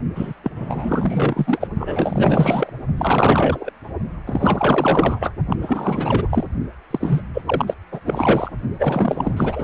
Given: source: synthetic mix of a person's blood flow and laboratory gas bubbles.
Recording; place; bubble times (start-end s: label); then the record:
Doppler ultrasound of blood flow; precordium
0.15-0.33 s: bubbles
0.43-0.52 s: bubbles
0.56-1.67 s: bubbles
1.78-2.71 s: bubbles
2.96-3.71 s: bubbles
4.26-5.31 s: bubbles
5.50-5.56 s: bubbles
5.61-6.47 s: bubbles
6.91-7.24 s: bubbles
7.33-7.42 s: bubbles
7.46-7.74 s: bubbles
7.91-8.00 s: bubbles
8.05-8.52 s: bubbles
8.79-9.63 s: bubbles
From the record:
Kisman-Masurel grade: 444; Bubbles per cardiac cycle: continuous sound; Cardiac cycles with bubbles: 100%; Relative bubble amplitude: maximal (0.775 to 0.999); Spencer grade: 4 (maximum detectable bubble signal sounding continuously throughout systole and diastole of every cardiac period, and overriding the amplitude of the normal cardiac signals); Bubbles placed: only in the low amplitude regions of the cardiac cycle